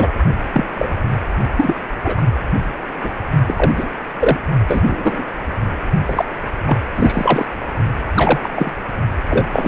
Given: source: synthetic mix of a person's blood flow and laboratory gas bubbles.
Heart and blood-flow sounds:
Doppler ultrasound of blood flow; precordium
0.00-0.12 s: bubbles
0.54-0.66 s: bubbles
0.74-0.94 s: bubbles
1.57-1.75 s: bubbles
2.04-2.15 s: bubbles
2.17-2.23 s: bubbles
3.02-3.12 s: bubbles
3.48-3.71 s: bubbles
3.76-3.88 s: bubbles
4.20-4.38 s: bubbles
4.67-5.24 s: bubbles
6.06-6.24 s: bubbles
6.67-6.78 s: bubbles
6.95-7.46 s: bubbles
8.15-8.71 s: bubbles
9.27-9.46 s: bubbles
9.53-9.68 s: bubbles
From the record:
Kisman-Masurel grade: 243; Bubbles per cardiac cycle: several, 3 to 8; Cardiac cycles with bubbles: 100%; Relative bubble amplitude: loud (0.450 to 0.775); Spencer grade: 3 (all of the cardiac periods contain showers or single bubble signals, but not dominating or overriding the cardiac motion signals); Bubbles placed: only in the low amplitude regions of the cardiac cycle

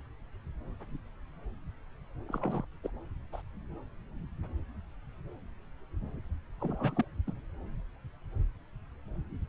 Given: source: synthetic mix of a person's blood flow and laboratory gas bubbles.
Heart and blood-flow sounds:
Doppler ultrasound of blood flow; subclavian vein
2.29-2.65 s: bubbles
2.83-2.90 s: bubbles
3.33-3.42 s: bubbles
6.60-7.04 s: bubbles
7.27-7.31 s: bubbles
From the record:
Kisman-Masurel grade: 221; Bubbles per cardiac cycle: several, 3 to 8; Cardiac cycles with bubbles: 10 to 50%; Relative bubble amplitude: barely perceptible (0.100 to 0.250); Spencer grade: 2 (many but less than half of the cardiac periods contain bubble signals, singularly or in groups); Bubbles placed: anywhere in the cardiac cycle

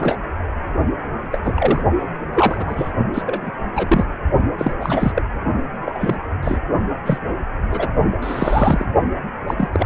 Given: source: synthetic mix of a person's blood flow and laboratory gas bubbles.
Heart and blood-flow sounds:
Doppler ultrasound of blood flow; precordium
0.00-0.18 s: bubbles
1.31-1.40 s: bubbles
1.44-1.53 s: bubbles
1.56-1.82 s: bubbles
2.33-2.91 s: bubbles
3.14-3.22 s: bubbles
3.25-3.51 s: bubbles
3.75-4.05 s: bubbles
4.58-4.71 s: bubbles
4.79-5.12 s: bubbles
5.15-5.22 s: bubbles
5.86-6.17 s: bubbles
6.42-6.58 s: bubbles
7.05-7.18 s: bubbles
7.70-7.88 s: bubbles
8.22-8.86 s: bubbles
9.48-9.54 s: bubbles
9.57-9.68 s: bubbles
9.73-9.86 s: bubbles
From the record:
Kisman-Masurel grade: 242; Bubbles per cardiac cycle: several, 3 to 8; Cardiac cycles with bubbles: 100%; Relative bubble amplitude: moderate (0.250 to 0.450); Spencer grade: 3 (all of the cardiac periods contain showers or single bubble signals, but not dominating or overriding the cardiac motion signals); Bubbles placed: only in the low amplitude regions of the cardiac cycle

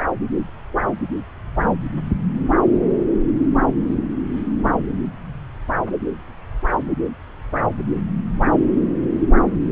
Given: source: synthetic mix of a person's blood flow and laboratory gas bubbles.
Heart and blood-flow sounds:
Doppler ultrasound of blood flow; subclavian vein
no bubbles
From the record:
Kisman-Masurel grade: 000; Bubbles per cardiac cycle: 0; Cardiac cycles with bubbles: 0%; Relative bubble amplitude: no bubbles discernible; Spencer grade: 0 (complete lack of bubble signals)

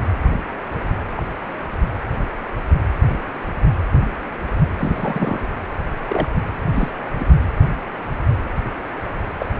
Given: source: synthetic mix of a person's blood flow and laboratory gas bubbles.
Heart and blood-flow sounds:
Doppler ultrasound of blood flow; precordium
1.17-1.21 s: bubbles
4.77-5.43 s: bubbles
6.08-6.29 s: bubbles
6.73-6.90 s: bubbles
7.18-7.27 s: bubbles
9.39-9.47 s: bubbles
From the record:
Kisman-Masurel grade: 122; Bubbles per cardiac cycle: 1 to 2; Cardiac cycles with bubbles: 10 to 50%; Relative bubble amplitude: moderate (0.250 to 0.450); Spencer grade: 2 (many but less than half of the cardiac periods contain bubble signals, singularly or in groups); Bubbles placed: anywhere in the cardiac cycle

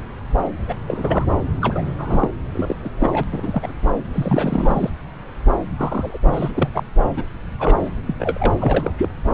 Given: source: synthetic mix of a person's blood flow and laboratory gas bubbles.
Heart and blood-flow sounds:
Doppler ultrasound of blood flow; subclavian vein
0.68-0.75 s: bubbles
0.87-1.25 s: bubbles
1.61-1.82 s: bubbles
1.98-2.29 s: bubbles
2.52-2.75 s: bubbles
2.84-2.89 s: bubbles
2.98-3.23 s: bubbles
3.32-3.72 s: bubbles
4.13-4.91 s: bubbles
5.77-6.18 s: bubbles
6.23-6.50 s: bubbles
6.54-6.69 s: bubbles
6.74-6.83 s: bubbles
7.16-7.24 s: bubbles
7.59-7.79 s: bubbles
7.82-7.89 s: bubbles
8.06-8.14 s: bubbles
8.20-8.54 s: bubbles
8.60-8.93 s: bubbles
8.98-9.09 s: bubbles
From the record:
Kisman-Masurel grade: 232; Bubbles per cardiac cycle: several, 3 to 8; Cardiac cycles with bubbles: 50 to 99%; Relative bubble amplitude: moderate (0.250 to 0.450); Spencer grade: 3 (all of the cardiac periods contain showers or single bubble signals, but not dominating or overriding the cardiac motion signals); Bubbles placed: anywhere in the cardiac cycle

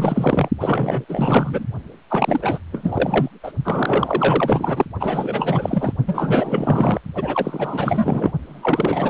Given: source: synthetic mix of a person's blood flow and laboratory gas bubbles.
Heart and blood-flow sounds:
Doppler ultrasound of blood flow; precordium
0.00-0.49 s: bubbles
0.59-1.05 s: bubbles
1.08-1.65 s: bubbles
2.10-2.58 s: bubbles
2.72-3.29 s: bubbles
3.43-3.52 s: bubbles
3.65-4.85 s: bubbles
4.99-5.93 s: bubbles
6.06-7.01 s: bubbles
7.14-8.31 s: bubbles
8.42-9.10 s: bubbles
From the record:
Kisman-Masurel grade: 444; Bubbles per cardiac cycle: continuous sound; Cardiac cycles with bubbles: 100%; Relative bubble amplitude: maximal (0.775 to 0.999); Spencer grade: 4 (maximum detectable bubble signal sounding continuously throughout systole and diastole of every cardiac period, and overriding the amplitude of the normal cardiac signals); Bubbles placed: only in the low amplitude regions of the cardiac cycle

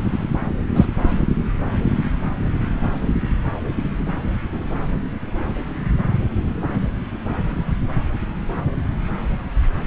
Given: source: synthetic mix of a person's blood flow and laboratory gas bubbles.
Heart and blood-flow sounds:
Doppler ultrasound of blood flow; subclavian vein
0.73-0.85 s: bubbles
From the record:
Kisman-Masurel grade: 113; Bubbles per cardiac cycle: 1 to 2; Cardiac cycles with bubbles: 1 to 10%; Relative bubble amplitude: loud (0.450 to 0.775); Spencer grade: 1 (occasional bubble signal discernible with the cardiac motion signal, with majority of cardiac periods free of bubbles); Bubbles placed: anywhere in the cardiac cycle

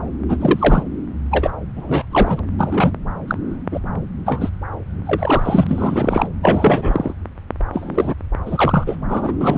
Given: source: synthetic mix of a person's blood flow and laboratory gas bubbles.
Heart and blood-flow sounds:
Doppler ultrasound of blood flow; subclavian vein
0.28-0.36 s: bubbles
0.40-0.83 s: bubbles
1.31-1.50 s: bubbles
1.75-2.05 s: bubbles
2.11-2.41 s: bubbles
2.58-2.92 s: bubbles
3.27-3.37 s: bubbles
3.71-3.80 s: bubbles
4.26-4.50 s: bubbles
5.06-6.28 s: bubbles
6.42-7.13 s: bubbles
7.73-8.14 s: bubbles
8.46-8.96 s: bubbles
9.08-9.33 s: bubbles
9.41-9.58 s: bubbles
From the record:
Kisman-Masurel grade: 243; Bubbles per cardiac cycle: several, 3 to 8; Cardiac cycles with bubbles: 100%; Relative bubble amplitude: loud (0.450 to 0.775); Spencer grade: 3 (all of the cardiac periods contain showers or single bubble signals, but not dominating or overriding the cardiac motion signals); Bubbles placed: anywhere in the cardiac cycle

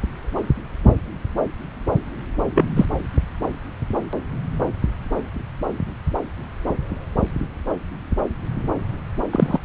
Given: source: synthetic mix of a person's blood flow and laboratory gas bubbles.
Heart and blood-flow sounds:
Doppler ultrasound of blood flow; subclavian vein
2.54-2.65 s: bubbles
2.75-2.85 s: bubbles
9.32-9.59 s: bubbles
From the record:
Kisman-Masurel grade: 113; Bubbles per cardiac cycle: 1 to 2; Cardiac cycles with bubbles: 1 to 10%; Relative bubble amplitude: loud (0.450 to 0.775); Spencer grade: 1 (occasional bubble signal discernible with the cardiac motion signal, with majority of cardiac periods free of bubbles); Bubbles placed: anywhere in the cardiac cycle

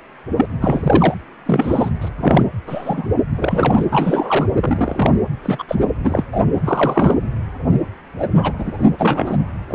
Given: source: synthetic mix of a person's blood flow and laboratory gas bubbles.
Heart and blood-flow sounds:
Doppler ultrasound of blood flow; precordium
0.36-0.46 s: bubbles
0.62-1.15 s: bubbles
1.46-1.91 s: bubbles
2.01-2.08 s: bubbles
2.18-2.45 s: bubbles
2.67-3.13 s: bubbles
3.35-3.86 s: bubbles
3.91-4.46 s: bubbles
4.59-5.12 s: bubbles
5.43-5.63 s: bubbles
5.68-5.75 s: bubbles
6.04-6.23 s: bubbles
6.32-6.41 s: bubbles
6.64-7.14 s: bubbles
8.18-8.28 s: bubbles
8.36-8.52 s: bubbles
8.58-8.85 s: bubbles
8.99-9.38 s: bubbles
9.70-9.75 s: bubbles
From the record:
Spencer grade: 3 (all of the cardiac periods contain showers or single bubble signals, but not dominating or overriding the cardiac motion signals); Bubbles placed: anywhere in the cardiac cycle

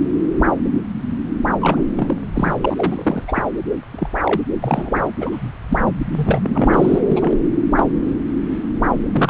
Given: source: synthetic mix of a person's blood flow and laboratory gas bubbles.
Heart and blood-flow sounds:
Doppler ultrasound of blood flow; subclavian vein
1.61-1.83 s: bubbles
1.97-2.17 s: bubbles
2.35-2.54 s: bubbles
2.60-3.43 s: bubbles
3.92-4.08 s: bubbles
4.25-4.40 s: bubbles
4.62-5.11 s: bubbles
5.20-5.51 s: bubbles
5.69-5.77 s: bubbles
5.87-5.92 s: bubbles
6.16-7.00 s: bubbles
7.09-7.37 s: bubbles
7.76-7.83 s: bubbles
9.12-9.30 s: bubbles
From the record:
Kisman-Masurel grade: 232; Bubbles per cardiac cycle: several, 3 to 8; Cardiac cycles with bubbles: 50 to 99%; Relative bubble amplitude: moderate (0.250 to 0.450); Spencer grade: 3 (all of the cardiac periods contain showers or single bubble signals, but not dominating or overriding the cardiac motion signals); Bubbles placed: anywhere in the cardiac cycle

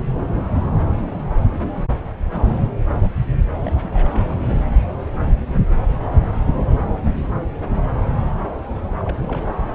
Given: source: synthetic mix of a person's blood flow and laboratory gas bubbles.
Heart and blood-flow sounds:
Doppler ultrasound of blood flow; subclavian vein
3.64-3.73 s: bubbles
3.83-4.09 s: bubbles
4.12-4.25 s: bubbles
4.28-4.65 s: bubbles
8.98-9.56 s: bubbles
From the record:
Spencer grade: 2 (many but less than half of the cardiac periods contain bubble signals, singularly or in groups); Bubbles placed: anywhere in the cardiac cycle

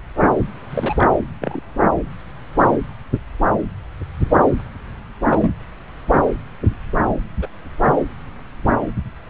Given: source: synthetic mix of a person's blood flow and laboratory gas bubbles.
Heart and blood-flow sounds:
Doppler ultrasound of blood flow; subclavian vein
0.70-1.06 s: bubbles
1.42-1.60 s: bubbles
2.59-2.65 s: bubbles
5.26-5.54 s: bubbles
7.42-7.47 s: bubbles
From the record:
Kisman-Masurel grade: 122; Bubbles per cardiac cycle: 1 to 2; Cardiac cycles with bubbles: 10 to 50%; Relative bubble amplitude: moderate (0.250 to 0.450); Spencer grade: 2 (many but less than half of the cardiac periods contain bubble signals, singularly or in groups); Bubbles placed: anywhere in the cardiac cycle

